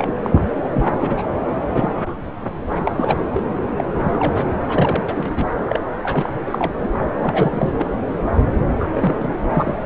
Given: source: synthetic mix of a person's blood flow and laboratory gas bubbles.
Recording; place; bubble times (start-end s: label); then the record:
Doppler ultrasound of blood flow; subclavian vein
0.00-0.14 s: bubbles
0.23-0.40 s: bubbles
0.73-0.85 s: bubbles
0.98-1.24 s: bubbles
1.74-2.18 s: bubbles
2.68-2.92 s: bubbles
2.97-3.27 s: bubbles
3.32-3.43 s: bubbles
3.78-3.84 s: bubbles
3.93-4.45 s: bubbles
4.69-5.04 s: bubbles
5.08-5.46 s: bubbles
5.65-5.79 s: bubbles
6.03-6.73 s: bubbles
6.80-6.89 s: bubbles
7.21-7.73 s: bubbles
7.79-7.86 s: bubbles
8.79-8.88 s: bubbles
8.95-9.28 s: bubbles
9.54-9.77 s: bubbles
From the record:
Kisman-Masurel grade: 242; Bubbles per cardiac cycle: several, 3 to 8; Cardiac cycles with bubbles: 100%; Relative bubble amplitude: moderate (0.250 to 0.450); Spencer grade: 3 (all of the cardiac periods contain showers or single bubble signals, but not dominating or overriding the cardiac motion signals); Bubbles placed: anywhere in the cardiac cycle